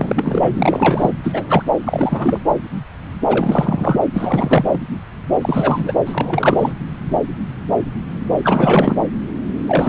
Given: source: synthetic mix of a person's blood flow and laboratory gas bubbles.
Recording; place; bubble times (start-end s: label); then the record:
Doppler ultrasound of blood flow; subclavian vein
0.00-0.53 s: bubbles
0.57-1.10 s: bubbles
1.23-1.62 s: bubbles
1.84-2.40 s: bubbles
3.28-3.99 s: bubbles
4.13-4.79 s: bubbles
5.41-5.94 s: bubbles
6.05-6.73 s: bubbles
8.44-8.96 s: bubbles
9.67-9.88 s: bubbles
From the record:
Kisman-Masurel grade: 333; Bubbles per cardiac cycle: rolling drumbeat, 9 or more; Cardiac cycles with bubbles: 50 to 99%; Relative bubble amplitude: loud (0.450 to 0.775); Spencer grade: 3 (all of the cardiac periods contain showers or single bubble signals, but not dominating or overriding the cardiac motion signals); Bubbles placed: anywhere in the cardiac cycle